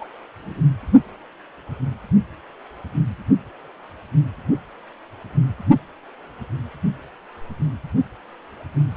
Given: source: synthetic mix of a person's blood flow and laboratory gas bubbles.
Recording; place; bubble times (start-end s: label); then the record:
Doppler ultrasound of blood flow; precordium
0.00-0.06 s: bubbles
0.42-0.61 s: bubbles
From the record:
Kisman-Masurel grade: 111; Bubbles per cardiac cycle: 1 to 2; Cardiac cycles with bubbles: 1 to 10%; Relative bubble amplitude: barely perceptible (0.100 to 0.250); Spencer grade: 1 (occasional bubble signal discernible with the cardiac motion signal, with majority of cardiac periods free of bubbles); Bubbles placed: anywhere in the cardiac cycle